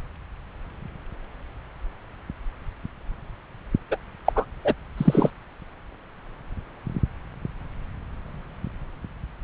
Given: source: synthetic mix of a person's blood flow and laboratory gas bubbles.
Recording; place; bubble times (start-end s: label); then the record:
Doppler ultrasound of blood flow; subclavian vein
3.91-3.97 s: bubbles
4.25-4.33 s: bubbles
4.35-4.45 s: bubbles
4.64-4.74 s: bubbles
4.97-5.31 s: bubbles
From the record:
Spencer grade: 1 (occasional bubble signal discernible with the cardiac motion signal, with majority of cardiac periods free of bubbles); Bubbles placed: anywhere in the cardiac cycle